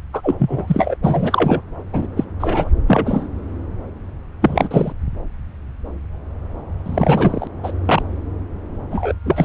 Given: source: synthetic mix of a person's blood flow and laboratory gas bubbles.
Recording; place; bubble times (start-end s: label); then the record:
Doppler ultrasound of blood flow; subclavian vein
0.12-0.35 s: bubbles
0.39-0.96 s: bubbles
1.04-1.61 s: bubbles
1.92-2.08 s: bubbles
2.16-2.25 s: bubbles
2.40-2.69 s: bubbles
2.87-3.27 s: bubbles
4.42-4.92 s: bubbles
6.85-7.47 s: bubbles
7.63-7.71 s: bubbles
7.85-8.03 s: bubbles
8.90-9.13 s: bubbles
9.26-9.45 s: bubbles
From the record:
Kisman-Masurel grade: 233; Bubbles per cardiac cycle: several, 3 to 8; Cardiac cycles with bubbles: 50 to 99%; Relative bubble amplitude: loud (0.450 to 0.775); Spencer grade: 3 (all of the cardiac periods contain showers or single bubble signals, but not dominating or overriding the cardiac motion signals); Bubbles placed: anywhere in the cardiac cycle